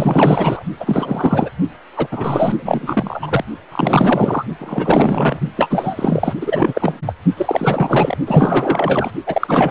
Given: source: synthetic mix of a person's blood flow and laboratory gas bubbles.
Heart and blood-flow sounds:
Doppler ultrasound of blood flow; precordium
0.00-0.63 s: bubbles
0.79-1.50 s: bubbles
1.96-2.08 s: bubbles
2.11-3.44 s: bubbles
3.71-4.45 s: bubbles
4.59-5.41 s: bubbles
5.56-6.33 s: bubbles
6.41-7.00 s: bubbles
7.06-7.14 s: bubbles
7.37-8.17 s: bubbles
8.26-9.11 s: bubbles
9.26-9.71 s: bubbles
From the record:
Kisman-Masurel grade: 444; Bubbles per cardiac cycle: continuous sound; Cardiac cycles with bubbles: 100%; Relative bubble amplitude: maximal (0.775 to 0.999); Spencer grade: 4 (maximum detectable bubble signal sounding continuously throughout systole and diastole of every cardiac period, and overriding the amplitude of the normal cardiac signals); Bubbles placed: only in the low amplitude regions of the cardiac cycle

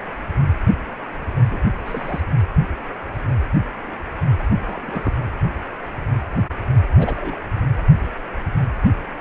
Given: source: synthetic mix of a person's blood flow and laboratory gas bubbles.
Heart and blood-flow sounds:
Doppler ultrasound of blood flow; precordium
1.50-1.58 s: bubbles
1.85-2.21 s: bubbles
4.63-5.12 s: bubbles
6.98-7.40 s: bubbles
From the record:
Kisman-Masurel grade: 121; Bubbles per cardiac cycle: 1 to 2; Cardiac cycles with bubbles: 10 to 50%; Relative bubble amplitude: barely perceptible (0.100 to 0.250); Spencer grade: 2 (many but less than half of the cardiac periods contain bubble signals, singularly or in groups); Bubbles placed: only in the low amplitude regions of the cardiac cycle

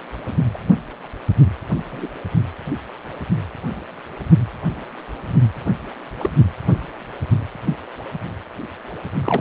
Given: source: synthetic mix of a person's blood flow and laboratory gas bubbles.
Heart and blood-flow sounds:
Doppler ultrasound of blood flow; precordium
0.54-0.58 s: bubbles
1.92-2.08 s: bubbles
6.20-6.30 s: bubbles
7.65-7.74 s: bubbles
9.24-9.41 s: bubbles
From the record:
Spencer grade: 2 (many but less than half of the cardiac periods contain bubble signals, singularly or in groups); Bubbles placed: anywhere in the cardiac cycle

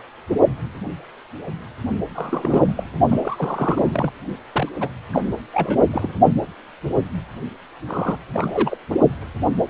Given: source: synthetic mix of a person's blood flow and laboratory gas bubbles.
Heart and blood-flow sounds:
Doppler ultrasound of blood flow; precordium
2.15-2.83 s: bubbles
3.09-4.11 s: bubbles
4.53-4.69 s: bubbles
4.80-4.89 s: bubbles
5.12-5.22 s: bubbles
5.54-5.79 s: bubbles
5.91-6.13 s: bubbles
7.87-8.18 s: bubbles
8.34-8.77 s: bubbles
8.89-8.97 s: bubbles
From the record:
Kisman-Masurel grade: 222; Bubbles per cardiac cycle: several, 3 to 8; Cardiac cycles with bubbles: 10 to 50%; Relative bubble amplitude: moderate (0.250 to 0.450); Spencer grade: 2 (many but less than half of the cardiac periods contain bubble signals, singularly or in groups); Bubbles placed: only in the low amplitude regions of the cardiac cycle

